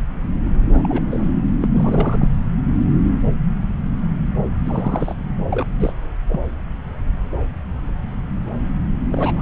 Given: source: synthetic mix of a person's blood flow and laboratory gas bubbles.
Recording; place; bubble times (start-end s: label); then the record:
Doppler ultrasound of blood flow; subclavian vein
0.73-1.32 s: bubbles
1.60-1.69 s: bubbles
1.73-2.28 s: bubbles
4.65-5.15 s: bubbles
5.50-5.63 s: bubbles
5.79-5.93 s: bubbles
6.29-6.40 s: bubbles
9.11-9.42 s: bubbles
From the record:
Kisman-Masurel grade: 222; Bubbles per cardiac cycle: several, 3 to 8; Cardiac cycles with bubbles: 10 to 50%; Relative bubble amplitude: moderate (0.250 to 0.450); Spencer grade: 2 (many but less than half of the cardiac periods contain bubble signals, singularly or in groups); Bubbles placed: anywhere in the cardiac cycle